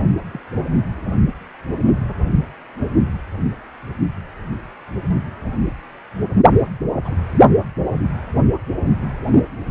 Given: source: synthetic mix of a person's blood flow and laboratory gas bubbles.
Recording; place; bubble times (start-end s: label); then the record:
Doppler ultrasound of blood flow; precordium
0.32-0.40 s: bubbles
7.05-7.14 s: bubbles
From the record:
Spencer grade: 2 (many but less than half of the cardiac periods contain bubble signals, singularly or in groups); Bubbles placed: anywhere in the cardiac cycle